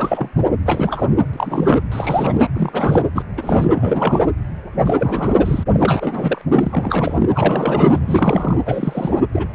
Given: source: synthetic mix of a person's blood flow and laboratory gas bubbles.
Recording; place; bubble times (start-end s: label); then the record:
Doppler ultrasound of blood flow; precordium
0.00-0.29 s: bubbles
0.38-0.46 s: bubbles
0.66-1.08 s: bubbles
1.33-1.82 s: bubbles
1.92-2.48 s: bubbles
2.54-3.03 s: bubbles
3.15-3.22 s: bubbles
3.37-4.27 s: bubbles
4.85-5.63 s: bubbles
5.74-6.42 s: bubbles
6.54-7.29 s: bubbles
7.35-8.60 s: bubbles
8.65-9.23 s: bubbles
9.32-9.47 s: bubbles
9.53-9.55 s: bubbles
From the record:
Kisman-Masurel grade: 342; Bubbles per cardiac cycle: rolling drumbeat, 9 or more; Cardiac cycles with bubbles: 100%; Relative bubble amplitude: moderate (0.250 to 0.450); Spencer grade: 3 (all of the cardiac periods contain showers or single bubble signals, but not dominating or overriding the cardiac motion signals); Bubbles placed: anywhere in the cardiac cycle